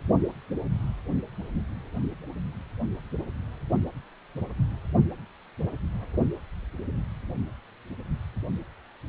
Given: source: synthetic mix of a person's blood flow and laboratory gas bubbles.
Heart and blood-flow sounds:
Doppler ultrasound of blood flow; precordium
no bubbles
From the record:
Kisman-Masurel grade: 000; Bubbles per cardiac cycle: 0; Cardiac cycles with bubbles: 0%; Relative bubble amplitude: no bubbles discernible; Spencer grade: 0 (complete lack of bubble signals)

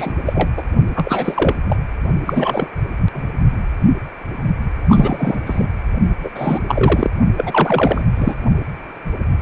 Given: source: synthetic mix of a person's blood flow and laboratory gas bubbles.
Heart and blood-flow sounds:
Doppler ultrasound of blood flow; precordium
0.00-0.12 s: bubbles
0.26-0.49 s: bubbles
0.57-0.64 s: bubbles
0.95-1.54 s: bubbles
1.65-1.76 s: bubbles
2.26-2.69 s: bubbles
3.12-3.32 s: bubbles
4.89-5.42 s: bubbles
5.46-5.68 s: bubbles
6.23-6.29 s: bubbles
6.34-6.60 s: bubbles
6.68-7.10 s: bubbles
7.36-8.06 s: bubbles
8.14-8.35 s: bubbles
From the record:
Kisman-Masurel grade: 333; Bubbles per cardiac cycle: rolling drumbeat, 9 or more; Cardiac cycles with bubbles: 50 to 99%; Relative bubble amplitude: loud (0.450 to 0.775); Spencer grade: 3 (all of the cardiac periods contain showers or single bubble signals, but not dominating or overriding the cardiac motion signals); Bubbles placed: only in the low amplitude regions of the cardiac cycle

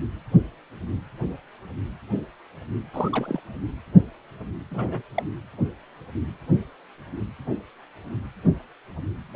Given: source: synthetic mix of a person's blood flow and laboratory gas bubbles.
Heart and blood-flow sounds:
Doppler ultrasound of blood flow; precordium
2.93-3.10 s: bubbles
3.12-3.40 s: bubbles
4.71-5.02 s: bubbles
5.14-5.23 s: bubbles
From the record:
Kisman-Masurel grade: 211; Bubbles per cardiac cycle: several, 3 to 8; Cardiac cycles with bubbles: 1 to 10%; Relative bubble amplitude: barely perceptible (0.100 to 0.250); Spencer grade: 1 (occasional bubble signal discernible with the cardiac motion signal, with majority of cardiac periods free of bubbles); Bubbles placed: anywhere in the cardiac cycle

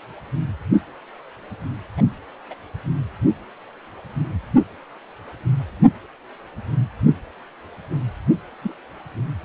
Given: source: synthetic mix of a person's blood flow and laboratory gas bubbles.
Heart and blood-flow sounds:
Doppler ultrasound of blood flow; precordium
1.97-2.02 s: bubbles
2.50-2.55 s: bubbles
8.62-8.73 s: bubbles
From the record:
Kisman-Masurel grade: 121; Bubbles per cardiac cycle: 1 to 2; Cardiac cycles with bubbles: 10 to 50%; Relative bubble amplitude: barely perceptible (0.100 to 0.250); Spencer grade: 2 (many but less than half of the cardiac periods contain bubble signals, singularly or in groups); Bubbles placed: anywhere in the cardiac cycle

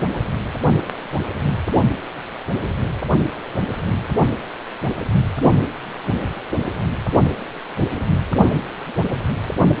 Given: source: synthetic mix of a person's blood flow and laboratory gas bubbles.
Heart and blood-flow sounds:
Doppler ultrasound of blood flow; precordium
no bubbles
From the record:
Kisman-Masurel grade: 000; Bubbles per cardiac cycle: 0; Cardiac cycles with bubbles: 0%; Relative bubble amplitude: no bubbles discernible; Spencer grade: 0 (complete lack of bubble signals)

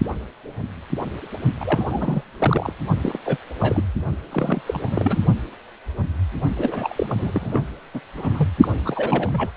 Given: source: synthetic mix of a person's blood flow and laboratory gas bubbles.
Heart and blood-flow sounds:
Doppler ultrasound of blood flow; precordium
1.60-2.23 s: bubbles
2.39-2.73 s: bubbles
3.02-3.17 s: bubbles
3.25-3.38 s: bubbles
3.60-3.85 s: bubbles
4.31-4.61 s: bubbles
4.67-5.20 s: bubbles
6.57-7.62 s: bubbles
7.94-8.00 s: bubbles
8.14-8.48 s: bubbles
8.61-8.68 s: bubbles
8.85-9.50 s: bubbles
From the record:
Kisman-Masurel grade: 332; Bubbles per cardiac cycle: rolling drumbeat, 9 or more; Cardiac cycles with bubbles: 50 to 99%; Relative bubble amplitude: moderate (0.250 to 0.450); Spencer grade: 3 (all of the cardiac periods contain showers or single bubble signals, but not dominating or overriding the cardiac motion signals); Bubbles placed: only in the low amplitude regions of the cardiac cycle

